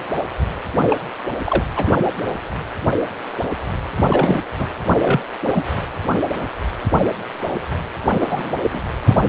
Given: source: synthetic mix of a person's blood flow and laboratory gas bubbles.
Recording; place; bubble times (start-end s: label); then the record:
Doppler ultrasound of blood flow; precordium
0.90-0.97 s: bubbles
1.44-1.65 s: bubbles
1.76-1.95 s: bubbles
4.09-4.40 s: bubbles
4.58-4.67 s: bubbles
4.99-5.20 s: bubbles
5.46-5.62 s: bubbles
8.21-8.55 s: bubbles
8.62-8.82 s: bubbles
9.04-9.29 s: bubbles
From the record:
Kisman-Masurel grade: 233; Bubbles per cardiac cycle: several, 3 to 8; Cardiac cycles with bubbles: 50 to 99%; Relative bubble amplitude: loud (0.450 to 0.775); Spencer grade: 3 (all of the cardiac periods contain showers or single bubble signals, but not dominating or overriding the cardiac motion signals); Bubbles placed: anywhere in the cardiac cycle